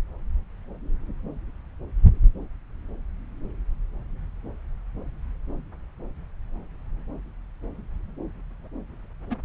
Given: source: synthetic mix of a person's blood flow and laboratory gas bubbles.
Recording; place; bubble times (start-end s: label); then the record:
Doppler ultrasound of blood flow; subclavian vein
9.30-9.36 s: bubbles
From the record:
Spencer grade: 2 (many but less than half of the cardiac periods contain bubble signals, singularly or in groups); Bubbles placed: anywhere in the cardiac cycle